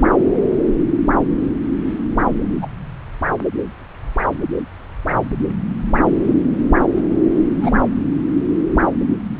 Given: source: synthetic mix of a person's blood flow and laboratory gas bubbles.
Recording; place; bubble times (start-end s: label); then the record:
Doppler ultrasound of blood flow; subclavian vein
2.62-2.69 s: bubbles
7.42-7.80 s: bubbles
From the record:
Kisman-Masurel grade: 112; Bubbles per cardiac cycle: 1 to 2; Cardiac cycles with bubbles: 1 to 10%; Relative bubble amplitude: moderate (0.250 to 0.450); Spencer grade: 1 (occasional bubble signal discernible with the cardiac motion signal, with majority of cardiac periods free of bubbles); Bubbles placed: anywhere in the cardiac cycle